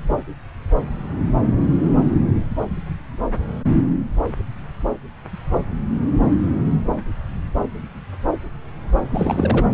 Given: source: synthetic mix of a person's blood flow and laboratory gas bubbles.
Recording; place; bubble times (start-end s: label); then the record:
Doppler ultrasound of blood flow; subclavian vein
9.10-9.66 s: bubbles
From the record:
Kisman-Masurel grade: 212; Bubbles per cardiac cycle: several, 3 to 8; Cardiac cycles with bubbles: 1 to 10%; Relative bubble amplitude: moderate (0.250 to 0.450); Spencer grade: 1 (occasional bubble signal discernible with the cardiac motion signal, with majority of cardiac periods free of bubbles); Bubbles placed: anywhere in the cardiac cycle